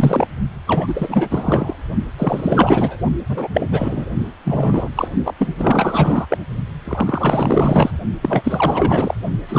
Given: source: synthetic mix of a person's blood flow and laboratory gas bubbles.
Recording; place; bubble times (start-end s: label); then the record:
Doppler ultrasound of blood flow; precordium
0.00-0.28 s: bubbles
0.67-1.76 s: bubbles
2.18-2.97 s: bubbles
3.29-3.48 s: bubbles
3.54-3.67 s: bubbles
3.71-4.05 s: bubbles
4.44-4.88 s: bubbles
4.95-5.08 s: bubbles
5.25-5.33 s: bubbles
5.38-6.27 s: bubbles
6.30-6.38 s: bubbles
6.84-7.91 s: bubbles
8.22-9.14 s: bubbles
9.48-9.59 s: bubbles
From the record:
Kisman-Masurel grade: 444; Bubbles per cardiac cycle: continuous sound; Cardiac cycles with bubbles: 100%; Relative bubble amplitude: maximal (0.775 to 0.999); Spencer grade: 4 (maximum detectable bubble signal sounding continuously throughout systole and diastole of every cardiac period, and overriding the amplitude of the normal cardiac signals); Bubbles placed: only in the low amplitude regions of the cardiac cycle